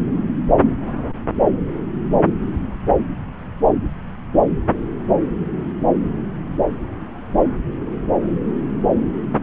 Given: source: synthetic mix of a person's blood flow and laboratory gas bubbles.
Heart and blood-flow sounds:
Doppler ultrasound of blood flow; subclavian vein
no bubbles
From the record:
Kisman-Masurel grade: 000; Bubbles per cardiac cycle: 0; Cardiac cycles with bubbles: 0%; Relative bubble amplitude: no bubbles discernible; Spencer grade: 0 (complete lack of bubble signals)

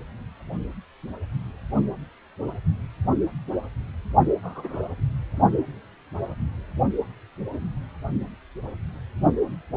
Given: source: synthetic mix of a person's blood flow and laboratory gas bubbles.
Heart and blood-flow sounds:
Doppler ultrasound of blood flow; precordium
4.42-4.85 s: bubbles
From the record:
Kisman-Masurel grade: 111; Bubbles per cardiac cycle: 1 to 2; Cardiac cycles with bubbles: 1 to 10%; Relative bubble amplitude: barely perceptible (0.100 to 0.250); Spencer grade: 1 (occasional bubble signal discernible with the cardiac motion signal, with majority of cardiac periods free of bubbles); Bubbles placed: only in the low amplitude regions of the cardiac cycle

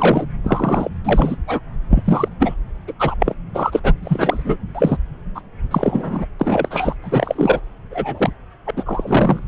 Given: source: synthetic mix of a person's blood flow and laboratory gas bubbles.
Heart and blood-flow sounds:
Doppler ultrasound of blood flow; subclavian vein
0.00-0.26 s: bubbles
0.44-0.89 s: bubbles
1.04-1.36 s: bubbles
1.47-1.60 s: bubbles
1.90-2.28 s: bubbles
2.39-2.57 s: bubbles
2.87-2.92 s: bubbles
2.99-3.15 s: bubbles
3.19-3.34 s: bubbles
3.54-3.80 s: bubbles
3.83-3.93 s: bubbles
4.02-4.56 s: bubbles
4.75-4.96 s: bubbles
5.35-5.41 s: bubbles
5.71-6.25 s: bubbles
6.40-6.95 s: bubbles
7.03-7.60 s: bubbles
7.91-8.30 s: bubbles
8.67-8.71 s: bubbles
8.76-9.39 s: bubbles
From the record:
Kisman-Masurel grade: 243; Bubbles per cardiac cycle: several, 3 to 8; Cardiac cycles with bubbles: 100%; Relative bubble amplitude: loud (0.450 to 0.775); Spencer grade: 3 (all of the cardiac periods contain showers or single bubble signals, but not dominating or overriding the cardiac motion signals); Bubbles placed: anywhere in the cardiac cycle

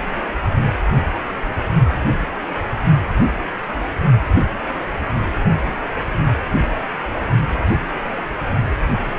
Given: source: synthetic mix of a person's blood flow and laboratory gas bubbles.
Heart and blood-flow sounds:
Doppler ultrasound of blood flow; precordium
no bubbles
From the record:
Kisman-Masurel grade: 000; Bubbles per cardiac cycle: 0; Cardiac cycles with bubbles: 0%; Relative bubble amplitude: no bubbles discernible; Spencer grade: 0 (complete lack of bubble signals)

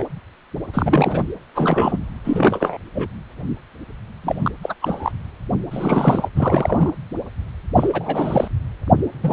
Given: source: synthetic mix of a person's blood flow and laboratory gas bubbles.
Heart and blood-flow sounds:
Doppler ultrasound of blood flow; precordium
0.00-0.06 s: bubbles
0.74-1.24 s: bubbles
1.55-1.99 s: bubbles
2.24-2.78 s: bubbles
2.95-3.08 s: bubbles
4.23-4.51 s: bubbles
4.62-4.75 s: bubbles
4.81-5.12 s: bubbles
5.71-6.29 s: bubbles
6.35-6.90 s: bubbles
7.76-8.48 s: bubbles
9.22-9.33 s: bubbles
From the record:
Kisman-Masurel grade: 332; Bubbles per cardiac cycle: rolling drumbeat, 9 or more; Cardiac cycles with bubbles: 50 to 99%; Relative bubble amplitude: moderate (0.250 to 0.450); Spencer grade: 3 (all of the cardiac periods contain showers or single bubble signals, but not dominating or overriding the cardiac motion signals); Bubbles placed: anywhere in the cardiac cycle

